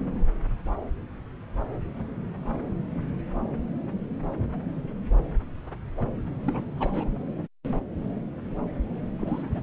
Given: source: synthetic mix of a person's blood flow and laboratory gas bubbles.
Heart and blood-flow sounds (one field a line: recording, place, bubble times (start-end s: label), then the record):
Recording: Doppler ultrasound of blood flow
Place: subclavian vein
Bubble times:
6.41-6.64 s: bubbles
6.78-7.12 s: bubbles
9.19-9.62 s: bubbles
From the record:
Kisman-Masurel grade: 221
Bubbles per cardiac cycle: several, 3 to 8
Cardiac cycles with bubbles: 10 to 50%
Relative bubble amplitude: barely perceptible (0.100 to 0.250)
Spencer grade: 2 (many but less than half of the cardiac periods contain bubble signals, singularly or in groups)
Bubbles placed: anywhere in the cardiac cycle